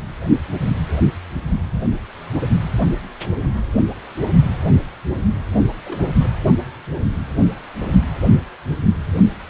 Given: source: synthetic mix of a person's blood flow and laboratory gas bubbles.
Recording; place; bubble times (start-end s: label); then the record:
Doppler ultrasound of blood flow; precordium
5.84-6.07 s: bubbles
6.20-6.31 s: bubbles
From the record:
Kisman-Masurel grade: 211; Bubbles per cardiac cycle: several, 3 to 8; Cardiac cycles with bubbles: 1 to 10%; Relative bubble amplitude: barely perceptible (0.100 to 0.250); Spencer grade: 1 (occasional bubble signal discernible with the cardiac motion signal, with majority of cardiac periods free of bubbles); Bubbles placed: only in the low amplitude regions of the cardiac cycle